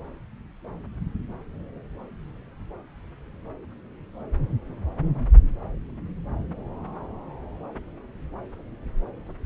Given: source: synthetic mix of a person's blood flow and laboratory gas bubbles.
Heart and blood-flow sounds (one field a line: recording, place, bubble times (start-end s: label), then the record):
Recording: Doppler ultrasound of blood flow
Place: subclavian vein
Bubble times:
no bubbles
From the record:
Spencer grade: 0 (complete lack of bubble signals)